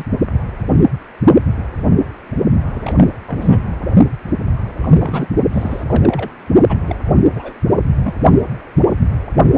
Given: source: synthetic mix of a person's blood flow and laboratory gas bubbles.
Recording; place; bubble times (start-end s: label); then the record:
Doppler ultrasound of blood flow; precordium
0.00-0.05 s: bubbles
2.71-3.05 s: bubbles
3.26-3.76 s: bubbles
4.82-5.27 s: bubbles
5.52-5.84 s: bubbles
5.88-6.29 s: bubbles
6.68-6.77 s: bubbles
6.86-6.95 s: bubbles
7.05-7.13 s: bubbles
7.35-7.54 s: bubbles
8.03-8.14 s: bubbles
From the record:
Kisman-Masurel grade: 232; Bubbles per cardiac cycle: several, 3 to 8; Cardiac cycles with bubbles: 50 to 99%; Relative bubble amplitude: moderate (0.250 to 0.450); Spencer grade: 3 (all of the cardiac periods contain showers or single bubble signals, but not dominating or overriding the cardiac motion signals); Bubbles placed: only in the low amplitude regions of the cardiac cycle